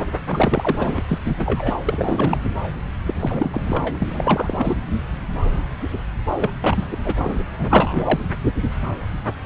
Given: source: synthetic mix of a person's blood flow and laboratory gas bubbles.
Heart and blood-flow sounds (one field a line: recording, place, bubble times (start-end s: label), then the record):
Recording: Doppler ultrasound of blood flow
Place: subclavian vein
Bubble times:
0.28-1.02 s: bubbles
1.08-1.19 s: bubbles
1.24-1.75 s: bubbles
1.85-2.40 s: bubbles
3.06-3.14 s: bubbles
3.20-3.96 s: bubbles
4.00-4.77 s: bubbles
6.39-6.50 s: bubbles
6.62-6.84 s: bubbles
6.91-6.97 s: bubbles
7.04-7.15 s: bubbles
7.24-7.42 s: bubbles
7.58-8.19 s: bubbles
From the record:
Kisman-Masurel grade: 332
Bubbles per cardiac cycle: rolling drumbeat, 9 or more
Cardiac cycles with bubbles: 50 to 99%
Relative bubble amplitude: moderate (0.250 to 0.450)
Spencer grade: 3 (all of the cardiac periods contain showers or single bubble signals, but not dominating or overriding the cardiac motion signals)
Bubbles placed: anywhere in the cardiac cycle